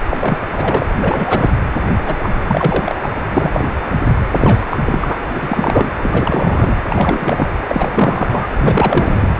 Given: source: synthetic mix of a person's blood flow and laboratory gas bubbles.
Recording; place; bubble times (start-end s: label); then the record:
Doppler ultrasound of blood flow; precordium
0.10-0.17 s: bubbles
0.20-0.38 s: bubbles
0.53-0.86 s: bubbles
0.96-0.98 s: bubbles
1.01-1.50 s: bubbles
2.02-2.18 s: bubbles
2.23-2.29 s: bubbles
2.47-2.95 s: bubbles
3.02-3.08 s: bubbles
3.35-3.66 s: bubbles
4.33-4.66 s: bubbles
4.71-4.80 s: bubbles
4.85-5.18 s: bubbles
5.34-5.89 s: bubbles
6.02-6.76 s: bubbles
6.90-7.48 s: bubbles
7.69-8.47 s: bubbles
8.57-9.28 s: bubbles
From the record:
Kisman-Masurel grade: 342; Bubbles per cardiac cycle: rolling drumbeat, 9 or more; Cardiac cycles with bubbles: 100%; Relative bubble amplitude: moderate (0.250 to 0.450); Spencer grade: 3 (all of the cardiac periods contain showers or single bubble signals, but not dominating or overriding the cardiac motion signals); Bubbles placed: anywhere in the cardiac cycle